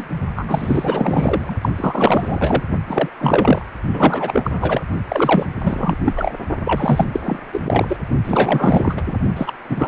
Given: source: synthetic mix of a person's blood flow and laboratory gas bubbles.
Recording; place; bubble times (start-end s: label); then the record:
Doppler ultrasound of blood flow; precordium
0.00-0.08 s: bubbles
0.35-1.56 s: bubbles
1.61-1.69 s: bubbles
1.77-2.63 s: bubbles
2.88-3.09 s: bubbles
3.19-3.65 s: bubbles
3.93-4.81 s: bubbles
5.08-5.47 s: bubbles
5.62-5.96 s: bubbles
6.04-6.35 s: bubbles
6.65-7.07 s: bubbles
7.12-7.21 s: bubbles
7.25-7.41 s: bubbles
7.53-7.97 s: bubbles
8.24-9.03 s: bubbles
9.08-9.18 s: bubbles
9.36-9.54 s: bubbles
9.69-9.88 s: bubbles
From the record:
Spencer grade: 4 (maximum detectable bubble signal sounding continuously throughout systole and diastole of every cardiac period, and overriding the amplitude of the normal cardiac signals); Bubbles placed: only in the low amplitude regions of the cardiac cycle